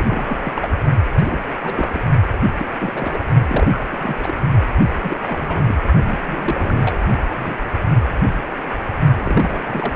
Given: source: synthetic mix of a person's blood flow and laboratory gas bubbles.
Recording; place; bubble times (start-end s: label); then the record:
Doppler ultrasound of blood flow; precordium
0.00-0.71 s: bubbles
1.16-1.42 s: bubbles
1.63-2.10 s: bubbles
2.57-2.66 s: bubbles
2.79-3.20 s: bubbles
3.49-3.68 s: bubbles
3.71-3.85 s: bubbles
3.90-4.35 s: bubbles
5.03-5.17 s: bubbles
5.21-5.75 s: bubbles
5.79-5.83 s: bubbles
6.03-6.18 s: bubbles
6.25-7.24 s: bubbles
7.35-7.58 s: bubbles
9.14-9.62 s: bubbles
9.65-9.94 s: bubbles
From the record:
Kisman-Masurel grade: 332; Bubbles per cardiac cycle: rolling drumbeat, 9 or more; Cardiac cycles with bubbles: 50 to 99%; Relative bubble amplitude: moderate (0.250 to 0.450); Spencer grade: 3 (all of the cardiac periods contain showers or single bubble signals, but not dominating or overriding the cardiac motion signals); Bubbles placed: only in the low amplitude regions of the cardiac cycle